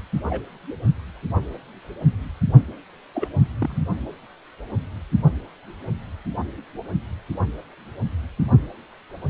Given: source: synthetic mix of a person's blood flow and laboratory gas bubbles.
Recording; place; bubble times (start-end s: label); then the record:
Doppler ultrasound of blood flow; precordium
0.30-0.41 s: bubbles
3.14-3.27 s: bubbles
3.61-3.83 s: bubbles
From the record:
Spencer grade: 2 (many but less than half of the cardiac periods contain bubble signals, singularly or in groups); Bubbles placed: only in the low amplitude regions of the cardiac cycle